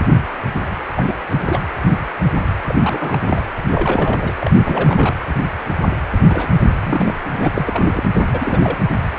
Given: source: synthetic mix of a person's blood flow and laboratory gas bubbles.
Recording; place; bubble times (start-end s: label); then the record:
Doppler ultrasound of blood flow; precordium
0.96-1.15 s: bubbles
1.29-1.69 s: bubbles
2.67-2.75 s: bubbles
2.81-3.43 s: bubbles
3.70-4.32 s: bubbles
4.38-4.51 s: bubbles
4.58-5.14 s: bubbles
6.29-6.53 s: bubbles
6.60-6.71 s: bubbles
6.83-7.13 s: bubbles
7.31-7.52 s: bubbles
7.55-8.04 s: bubbles
8.14-8.27 s: bubbles
8.32-8.78 s: bubbles
From the record:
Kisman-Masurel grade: 332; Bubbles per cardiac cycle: rolling drumbeat, 9 or more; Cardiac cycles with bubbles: 50 to 99%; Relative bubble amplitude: moderate (0.250 to 0.450); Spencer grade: 3 (all of the cardiac periods contain showers or single bubble signals, but not dominating or overriding the cardiac motion signals); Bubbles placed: anywhere in the cardiac cycle